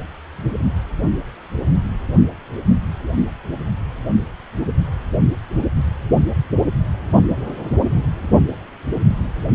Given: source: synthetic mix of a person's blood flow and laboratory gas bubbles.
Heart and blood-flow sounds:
Doppler ultrasound of blood flow; precordium
no bubbles
From the record:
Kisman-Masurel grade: 000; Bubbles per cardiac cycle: 0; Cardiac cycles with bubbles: 0%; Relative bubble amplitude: no bubbles discernible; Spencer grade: 0 (complete lack of bubble signals)

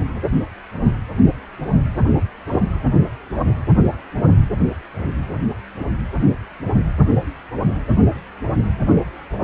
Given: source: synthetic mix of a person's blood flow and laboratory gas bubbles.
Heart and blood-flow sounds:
Doppler ultrasound of blood flow; precordium
2.48-2.60 s: bubbles
5.79-5.87 s: bubbles
9.41-9.44 s: bubbles
From the record:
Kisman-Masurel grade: 122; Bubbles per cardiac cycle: 1 to 2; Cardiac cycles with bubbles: 10 to 50%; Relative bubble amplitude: moderate (0.250 to 0.450); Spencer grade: 2 (many but less than half of the cardiac periods contain bubble signals, singularly or in groups); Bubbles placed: anywhere in the cardiac cycle

